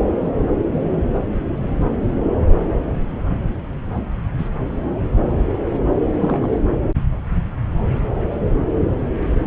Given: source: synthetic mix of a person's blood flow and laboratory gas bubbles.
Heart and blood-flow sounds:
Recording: Doppler ultrasound of blood flow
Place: subclavian vein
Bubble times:
4.38-4.49 s: bubbles
6.20-6.60 s: bubbles
From the record:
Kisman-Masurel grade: 122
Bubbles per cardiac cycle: 1 to 2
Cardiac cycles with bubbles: 10 to 50%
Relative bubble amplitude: moderate (0.250 to 0.450)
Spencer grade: 2 (many but less than half of the cardiac periods contain bubble signals, singularly or in groups)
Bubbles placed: anywhere in the cardiac cycle

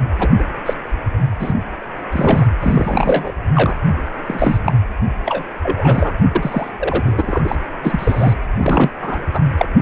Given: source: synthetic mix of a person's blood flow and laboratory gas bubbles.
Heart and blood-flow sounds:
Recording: Doppler ultrasound of blood flow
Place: precordium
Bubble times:
0.19-0.29 s: bubbles
0.38-0.44 s: bubbles
0.66-0.73 s: bubbles
1.39-1.53 s: bubbles
2.12-2.46 s: bubbles
2.61-3.32 s: bubbles
3.55-3.75 s: bubbles
4.26-4.58 s: bubbles
4.64-4.73 s: bubbles
5.25-5.44 s: bubbles
5.62-6.14 s: bubbles
6.35-6.71 s: bubbles
6.79-7.55 s: bubbles
7.81-8.33 s: bubbles
8.42-8.46 s: bubbles
8.56-8.90 s: bubbles
9.01-9.23 s: bubbles
9.33-9.41 s: bubbles
9.57-9.66 s: bubbles
From the record:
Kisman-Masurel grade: 243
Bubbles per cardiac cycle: several, 3 to 8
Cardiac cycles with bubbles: 100%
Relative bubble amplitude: loud (0.450 to 0.775)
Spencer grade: 3 (all of the cardiac periods contain showers or single bubble signals, but not dominating or overriding the cardiac motion signals)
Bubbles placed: anywhere in the cardiac cycle

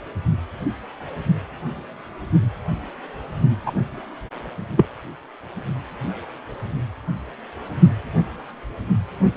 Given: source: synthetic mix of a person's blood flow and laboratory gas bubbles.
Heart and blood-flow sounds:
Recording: Doppler ultrasound of blood flow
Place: precordium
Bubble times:
3.65-3.71 s: bubbles
4.77-4.86 s: bubbles
From the record:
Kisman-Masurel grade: 113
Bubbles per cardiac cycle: 1 to 2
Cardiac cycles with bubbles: 1 to 10%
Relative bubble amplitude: loud (0.450 to 0.775)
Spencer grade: 1 (occasional bubble signal discernible with the cardiac motion signal, with majority of cardiac periods free of bubbles)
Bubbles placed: anywhere in the cardiac cycle

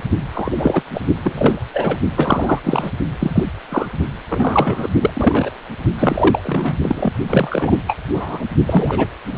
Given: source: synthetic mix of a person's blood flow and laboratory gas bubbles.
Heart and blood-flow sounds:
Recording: Doppler ultrasound of blood flow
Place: precordium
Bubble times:
0.34-0.82 s: bubbles
0.94-1.01 s: bubbles
1.24-1.62 s: bubbles
1.74-1.97 s: bubbles
2.15-2.59 s: bubbles
2.63-2.91 s: bubbles
3.19-3.43 s: bubbles
3.69-3.87 s: bubbles
4.29-4.88 s: bubbles
5.01-5.10 s: bubbles
5.14-5.50 s: bubbles
5.98-6.75 s: bubbles
6.83-7.12 s: bubbles
7.27-7.75 s: bubbles
7.87-7.96 s: bubbles
8.14-8.45 s: bubbles
8.67-9.08 s: bubbles
9.29-9.38 s: bubbles
From the record:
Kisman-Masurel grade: 243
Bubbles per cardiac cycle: several, 3 to 8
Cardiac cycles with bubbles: 100%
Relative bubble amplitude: loud (0.450 to 0.775)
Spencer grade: 3 (all of the cardiac periods contain showers or single bubble signals, but not dominating or overriding the cardiac motion signals)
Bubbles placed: only in the low amplitude regions of the cardiac cycle

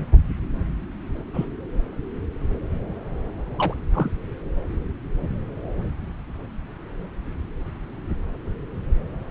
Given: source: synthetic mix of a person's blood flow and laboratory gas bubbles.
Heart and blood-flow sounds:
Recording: Doppler ultrasound of blood flow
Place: subclavian vein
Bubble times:
1.33-1.45 s: bubbles
3.58-3.74 s: bubbles
3.94-4.09 s: bubbles
From the record:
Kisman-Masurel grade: 122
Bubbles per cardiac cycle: 1 to 2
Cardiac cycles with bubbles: 10 to 50%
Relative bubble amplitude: moderate (0.250 to 0.450)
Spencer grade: 2 (many but less than half of the cardiac periods contain bubble signals, singularly or in groups)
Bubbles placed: anywhere in the cardiac cycle

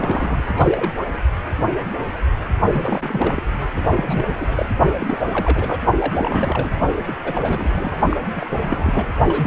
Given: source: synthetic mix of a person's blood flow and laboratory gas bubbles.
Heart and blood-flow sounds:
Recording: Doppler ultrasound of blood flow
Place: precordium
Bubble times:
0.00-0.43 s: bubbles
0.56-0.91 s: bubbles
2.71-3.42 s: bubbles
3.76-4.34 s: bubbles
4.38-4.69 s: bubbles
5.00-5.17 s: bubbles
5.25-5.82 s: bubbles
5.99-6.74 s: bubbles
7.07-7.17 s: bubbles
7.24-7.97 s: bubbles
8.09-8.17 s: bubbles
8.36-9.06 s: bubbles
9.28-9.47 s: bubbles
From the record:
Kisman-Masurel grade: 332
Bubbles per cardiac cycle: rolling drumbeat, 9 or more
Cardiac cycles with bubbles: 50 to 99%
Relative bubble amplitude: moderate (0.250 to 0.450)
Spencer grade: 3 (all of the cardiac periods contain showers or single bubble signals, but not dominating or overriding the cardiac motion signals)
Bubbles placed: only in the low amplitude regions of the cardiac cycle

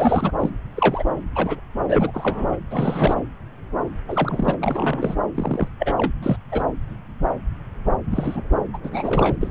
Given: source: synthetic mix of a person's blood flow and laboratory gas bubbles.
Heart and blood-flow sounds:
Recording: Doppler ultrasound of blood flow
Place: subclavian vein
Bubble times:
0.00-0.32 s: bubbles
0.39-0.50 s: bubbles
0.74-1.03 s: bubbles
1.35-1.60 s: bubbles
1.88-2.11 s: bubbles
2.14-2.56 s: bubbles
2.71-3.23 s: bubbles
4.08-4.56 s: bubbles
4.61-5.16 s: bubbles
5.34-5.68 s: bubbles
5.79-5.94 s: bubbles
5.97-6.11 s: bubbles
6.22-6.37 s: bubbles
6.51-6.62 s: bubbles
8.11-8.43 s: bubbles
8.73-8.78 s: bubbles
8.83-9.37 s: bubbles
9.40-9.51 s: bubbles
From the record:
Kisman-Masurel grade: 232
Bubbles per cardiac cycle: several, 3 to 8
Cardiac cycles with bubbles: 50 to 99%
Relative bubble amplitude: moderate (0.250 to 0.450)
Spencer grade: 3 (all of the cardiac periods contain showers or single bubble signals, but not dominating or overriding the cardiac motion signals)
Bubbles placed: anywhere in the cardiac cycle

